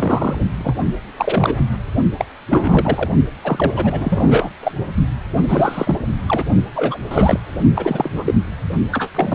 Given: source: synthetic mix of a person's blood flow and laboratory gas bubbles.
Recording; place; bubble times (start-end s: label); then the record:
Doppler ultrasound of blood flow; precordium
0.00-0.45 s: bubbles
0.59-0.74 s: bubbles
1.17-1.65 s: bubbles
2.19-2.25 s: bubbles
2.48-3.10 s: bubbles
3.43-4.50 s: bubbles
4.63-4.72 s: bubbles
5.41-5.98 s: bubbles
6.28-6.46 s: bubbles
6.75-6.98 s: bubbles
7.11-7.39 s: bubbles
7.74-8.34 s: bubbles
8.92-9.09 s: bubbles
9.15-9.35 s: bubbles
From the record:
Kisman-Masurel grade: 343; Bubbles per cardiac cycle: rolling drumbeat, 9 or more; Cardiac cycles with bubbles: 100%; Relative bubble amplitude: loud (0.450 to 0.775); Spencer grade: 3 (all of the cardiac periods contain showers or single bubble signals, but not dominating or overriding the cardiac motion signals); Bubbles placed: only in the low amplitude regions of the cardiac cycle